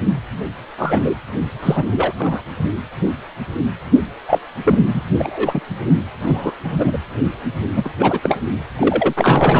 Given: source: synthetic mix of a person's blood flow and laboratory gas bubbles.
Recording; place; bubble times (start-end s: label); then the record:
Doppler ultrasound of blood flow; precordium
0.78-1.01 s: bubbles
1.04-1.14 s: bubbles
1.62-1.84 s: bubbles
1.92-2.13 s: bubbles
2.18-2.42 s: bubbles
4.28-4.38 s: bubbles
4.64-4.80 s: bubbles
4.87-5.02 s: bubbles
5.19-5.61 s: bubbles
6.21-6.52 s: bubbles
6.64-6.98 s: bubbles
7.75-7.90 s: bubbles
7.99-8.21 s: bubbles
8.23-8.38 s: bubbles
8.78-9.14 s: bubbles
9.18-9.60 s: bubbles
From the record:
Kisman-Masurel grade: 233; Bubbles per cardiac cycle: several, 3 to 8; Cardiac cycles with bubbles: 50 to 99%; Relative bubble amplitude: loud (0.450 to 0.775); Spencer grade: 3 (all of the cardiac periods contain showers or single bubble signals, but not dominating or overriding the cardiac motion signals); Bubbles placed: only in the low amplitude regions of the cardiac cycle